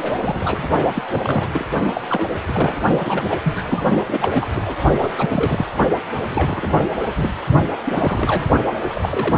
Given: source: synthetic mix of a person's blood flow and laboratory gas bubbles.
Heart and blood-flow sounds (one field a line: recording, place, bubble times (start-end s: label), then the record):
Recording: Doppler ultrasound of blood flow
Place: precordium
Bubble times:
0.00-0.68 s: bubbles
0.94-1.03 s: bubbles
1.10-1.49 s: bubbles
1.52-1.65 s: bubbles
1.93-2.01 s: bubbles
2.08-2.38 s: bubbles
2.46-2.80 s: bubbles
3.05-3.83 s: bubbles
4.06-4.46 s: bubbles
4.55-4.81 s: bubbles
5.00-5.11 s: bubbles
5.17-5.29 s: bubbles
5.31-5.66 s: bubbles
6.29-6.79 s: bubbles
6.83-7.06 s: bubbles
7.14-7.32 s: bubbles
7.85-8.46 s: bubbles
8.94-9.38 s: bubbles
From the record:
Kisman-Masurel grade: 342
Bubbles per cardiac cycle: rolling drumbeat, 9 or more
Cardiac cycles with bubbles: 100%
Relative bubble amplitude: moderate (0.250 to 0.450)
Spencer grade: 3 (all of the cardiac periods contain showers or single bubble signals, but not dominating or overriding the cardiac motion signals)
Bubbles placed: only in the low amplitude regions of the cardiac cycle